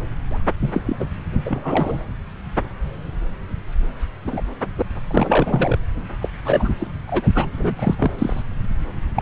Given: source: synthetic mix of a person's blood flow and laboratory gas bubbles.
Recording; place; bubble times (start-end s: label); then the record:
Doppler ultrasound of blood flow; subclavian vein
0.31-0.40 s: bubbles
0.60-0.70 s: bubbles
0.73-0.82 s: bubbles
0.85-0.96 s: bubbles
0.99-1.05 s: bubbles
1.45-2.00 s: bubbles
4.26-4.42 s: bubbles
4.60-4.82 s: bubbles
5.10-5.78 s: bubbles
6.21-6.28 s: bubbles
6.44-6.71 s: bubbles
6.78-6.87 s: bubbles
7.07-7.28 s: bubbles
7.34-7.49 s: bubbles
7.57-7.96 s: bubbles
7.98-8.11 s: bubbles
8.18-8.42 s: bubbles
9.14-9.22 s: bubbles
From the record:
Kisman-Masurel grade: 232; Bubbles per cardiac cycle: several, 3 to 8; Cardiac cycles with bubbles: 50 to 99%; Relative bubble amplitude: moderate (0.250 to 0.450); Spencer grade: 3 (all of the cardiac periods contain showers or single bubble signals, but not dominating or overriding the cardiac motion signals); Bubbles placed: anywhere in the cardiac cycle